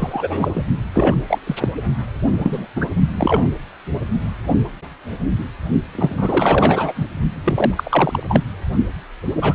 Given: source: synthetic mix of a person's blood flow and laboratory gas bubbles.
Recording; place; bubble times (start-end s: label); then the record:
Doppler ultrasound of blood flow; precordium
0.00-0.51 s: bubbles
0.54-0.64 s: bubbles
0.92-1.16 s: bubbles
1.28-1.39 s: bubbles
1.46-1.55 s: bubbles
1.59-1.68 s: bubbles
2.30-2.67 s: bubbles
2.75-2.88 s: bubbles
3.15-3.49 s: bubbles
5.95-7.06 s: bubbles
7.44-8.23 s: bubbles
8.28-8.40 s: bubbles
9.41-9.54 s: bubbles
From the record:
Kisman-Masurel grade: 233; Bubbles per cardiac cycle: several, 3 to 8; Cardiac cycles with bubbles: 50 to 99%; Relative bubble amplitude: loud (0.450 to 0.775); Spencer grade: 3 (all of the cardiac periods contain showers or single bubble signals, but not dominating or overriding the cardiac motion signals); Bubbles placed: only in the low amplitude regions of the cardiac cycle